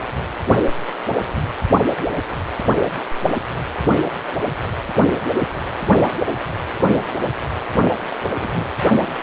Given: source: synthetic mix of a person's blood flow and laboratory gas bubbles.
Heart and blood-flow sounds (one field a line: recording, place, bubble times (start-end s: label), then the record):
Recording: Doppler ultrasound of blood flow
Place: precordium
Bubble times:
0.00-0.02 s: bubbles
1.99-2.07 s: bubbles
8.24-8.65 s: bubbles
From the record:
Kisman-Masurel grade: 121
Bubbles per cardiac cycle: 1 to 2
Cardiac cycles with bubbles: 10 to 50%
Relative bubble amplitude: barely perceptible (0.100 to 0.250)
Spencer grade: 2 (many but less than half of the cardiac periods contain bubble signals, singularly or in groups)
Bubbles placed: only in the low amplitude regions of the cardiac cycle